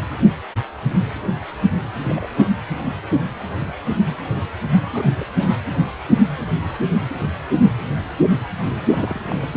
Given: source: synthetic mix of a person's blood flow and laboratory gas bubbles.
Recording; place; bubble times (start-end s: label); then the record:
Doppler ultrasound of blood flow; precordium
1.96-2.28 s: bubbles
2.35-2.50 s: bubbles
4.92-5.04 s: bubbles
5.19-5.26 s: bubbles
5.33-5.50 s: bubbles
8.69-9.22 s: bubbles
9.27-9.45 s: bubbles
From the record:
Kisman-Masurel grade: 221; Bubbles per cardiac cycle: several, 3 to 8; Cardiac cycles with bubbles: 10 to 50%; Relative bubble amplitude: barely perceptible (0.100 to 0.250); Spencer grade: 2 (many but less than half of the cardiac periods contain bubble signals, singularly or in groups); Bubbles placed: anywhere in the cardiac cycle